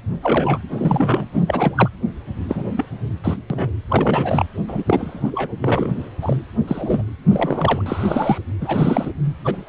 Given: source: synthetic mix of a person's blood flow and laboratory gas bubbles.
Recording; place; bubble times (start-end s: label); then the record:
Doppler ultrasound of blood flow; precordium
0.21-0.58 s: bubbles
0.73-1.25 s: bubbles
1.32-1.89 s: bubbles
2.49-2.73 s: bubbles
2.77-2.86 s: bubbles
3.24-3.37 s: bubbles
3.50-3.71 s: bubbles
3.90-4.46 s: bubbles
4.68-5.53 s: bubbles
5.61-6.10 s: bubbles
6.21-6.37 s: bubbles
6.67-7.02 s: bubbles
7.30-7.82 s: bubbles
7.86-8.38 s: bubbles
8.61-9.12 s: bubbles
9.44-9.69 s: bubbles
From the record:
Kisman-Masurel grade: 232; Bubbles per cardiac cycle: several, 3 to 8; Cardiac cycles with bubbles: 50 to 99%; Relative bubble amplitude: moderate (0.250 to 0.450); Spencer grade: 3 (all of the cardiac periods contain showers or single bubble signals, but not dominating or overriding the cardiac motion signals); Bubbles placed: anywhere in the cardiac cycle